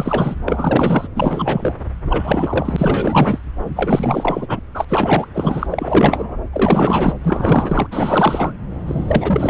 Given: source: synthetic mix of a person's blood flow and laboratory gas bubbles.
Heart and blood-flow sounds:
Doppler ultrasound of blood flow; subclavian vein
0.00-0.35 s: bubbles
0.46-1.08 s: bubbles
1.16-1.74 s: bubbles
2.06-3.38 s: bubbles
3.75-4.60 s: bubbles
4.74-4.85 s: bubbles
4.88-5.25 s: bubbles
5.34-5.67 s: bubbles
5.70-6.37 s: bubbles
6.52-7.13 s: bubbles
7.22-7.87 s: bubbles
7.91-8.54 s: bubbles
8.86-9.50 s: bubbles
From the record:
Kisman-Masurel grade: 444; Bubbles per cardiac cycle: continuous sound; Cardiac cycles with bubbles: 100%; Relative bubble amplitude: maximal (0.775 to 0.999); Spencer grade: 4 (maximum detectable bubble signal sounding continuously throughout systole and diastole of every cardiac period, and overriding the amplitude of the normal cardiac signals); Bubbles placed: anywhere in the cardiac cycle

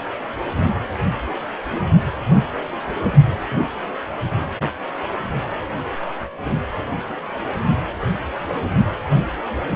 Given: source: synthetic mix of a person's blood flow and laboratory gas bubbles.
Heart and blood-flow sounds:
Doppler ultrasound of blood flow; precordium
no bubbles
From the record:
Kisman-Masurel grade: 000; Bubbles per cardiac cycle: 0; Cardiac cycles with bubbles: 0%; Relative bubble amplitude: no bubbles discernible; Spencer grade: 0 (complete lack of bubble signals)

